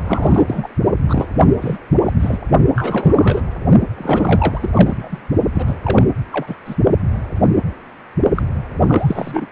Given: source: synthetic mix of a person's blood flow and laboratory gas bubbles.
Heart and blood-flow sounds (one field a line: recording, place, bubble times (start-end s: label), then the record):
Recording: Doppler ultrasound of blood flow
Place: precordium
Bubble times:
0.04-0.68 s: bubbles
1.05-1.26 s: bubbles
1.40-1.45 s: bubbles
1.61-1.78 s: bubbles
2.04-2.12 s: bubbles
2.19-2.38 s: bubbles
2.75-3.42 s: bubbles
3.97-4.70 s: bubbles
4.74-5.21 s: bubbles
5.55-5.77 s: bubbles
5.81-6.12 s: bubbles
6.32-6.56 s: bubbles
6.65-6.76 s: bubbles
8.35-8.43 s: bubbles
8.84-9.46 s: bubbles
From the record:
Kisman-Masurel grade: 333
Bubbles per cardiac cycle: rolling drumbeat, 9 or more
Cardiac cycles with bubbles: 50 to 99%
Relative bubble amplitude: loud (0.450 to 0.775)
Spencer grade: 3 (all of the cardiac periods contain showers or single bubble signals, but not dominating or overriding the cardiac motion signals)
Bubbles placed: only in the low amplitude regions of the cardiac cycle